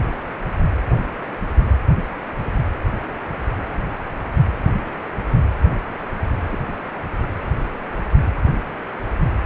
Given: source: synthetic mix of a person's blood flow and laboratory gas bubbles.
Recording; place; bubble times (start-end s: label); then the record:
Doppler ultrasound of blood flow; precordium
6.50-6.58 s: bubbles
7.21-7.30 s: bubbles
From the record:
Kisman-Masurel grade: 111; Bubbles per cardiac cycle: 1 to 2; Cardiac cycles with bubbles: 1 to 10%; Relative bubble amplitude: barely perceptible (0.100 to 0.250); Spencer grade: 1 (occasional bubble signal discernible with the cardiac motion signal, with majority of cardiac periods free of bubbles); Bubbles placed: anywhere in the cardiac cycle